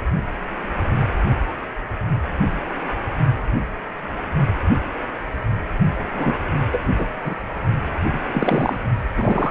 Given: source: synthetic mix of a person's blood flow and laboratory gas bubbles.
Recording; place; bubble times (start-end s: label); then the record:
Doppler ultrasound of blood flow; precordium
6.14-6.38 s: bubbles
6.72-6.79 s: bubbles
6.97-7.06 s: bubbles
7.21-7.34 s: bubbles
8.13-8.76 s: bubbles
9.17-9.51 s: bubbles
From the record:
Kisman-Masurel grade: 223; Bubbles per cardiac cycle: several, 3 to 8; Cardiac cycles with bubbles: 10 to 50%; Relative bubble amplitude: loud (0.450 to 0.775); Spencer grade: 2 (many but less than half of the cardiac periods contain bubble signals, singularly or in groups); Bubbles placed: only in the low amplitude regions of the cardiac cycle